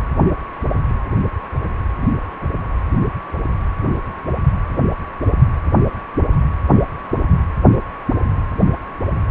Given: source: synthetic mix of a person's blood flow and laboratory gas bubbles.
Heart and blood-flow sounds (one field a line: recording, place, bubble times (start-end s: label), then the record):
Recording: Doppler ultrasound of blood flow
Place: precordium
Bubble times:
no bubbles
From the record:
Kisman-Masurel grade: 000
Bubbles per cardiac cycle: 0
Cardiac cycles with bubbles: 0%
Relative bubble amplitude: no bubbles discernible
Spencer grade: 0 (complete lack of bubble signals)